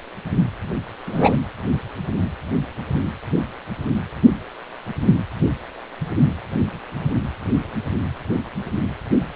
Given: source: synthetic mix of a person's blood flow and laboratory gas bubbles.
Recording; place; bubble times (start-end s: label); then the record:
Doppler ultrasound of blood flow; precordium
1.06-1.38 s: bubbles
From the record:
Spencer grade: 2 (many but less than half of the cardiac periods contain bubble signals, singularly or in groups); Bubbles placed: anywhere in the cardiac cycle